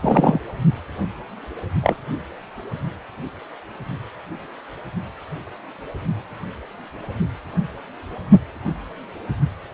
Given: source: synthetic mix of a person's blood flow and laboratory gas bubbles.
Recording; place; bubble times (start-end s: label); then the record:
Doppler ultrasound of blood flow; precordium
0.02-0.40 s: bubbles
1.83-1.96 s: bubbles
From the record:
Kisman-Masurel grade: 123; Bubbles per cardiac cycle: 1 to 2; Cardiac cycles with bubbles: 10 to 50%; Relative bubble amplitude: loud (0.450 to 0.775); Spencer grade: 2 (many but less than half of the cardiac periods contain bubble signals, singularly or in groups); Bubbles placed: only in the low amplitude regions of the cardiac cycle